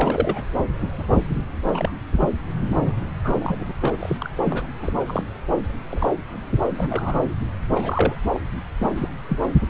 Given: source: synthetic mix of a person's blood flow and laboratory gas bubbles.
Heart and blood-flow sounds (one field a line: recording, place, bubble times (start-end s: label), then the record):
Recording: Doppler ultrasound of blood flow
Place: subclavian vein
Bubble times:
0.00-0.45 s: bubbles
0.97-1.22 s: bubbles
1.64-1.94 s: bubbles
2.21-2.29 s: bubbles
2.69-2.92 s: bubbles
3.24-3.73 s: bubbles
3.81-4.17 s: bubbles
4.20-4.26 s: bubbles
4.44-4.67 s: bubbles
4.80-5.24 s: bubbles
5.89-6.11 s: bubbles
6.75-7.21 s: bubbles
7.75-8.15 s: bubbles
8.31-8.40 s: bubbles
8.79-8.89 s: bubbles
8.96-9.08 s: bubbles
9.29-9.38 s: bubbles
From the record:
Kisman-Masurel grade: 242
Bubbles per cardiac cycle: several, 3 to 8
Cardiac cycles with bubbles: 100%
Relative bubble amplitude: moderate (0.250 to 0.450)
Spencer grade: 3 (all of the cardiac periods contain showers or single bubble signals, but not dominating or overriding the cardiac motion signals)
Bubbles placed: anywhere in the cardiac cycle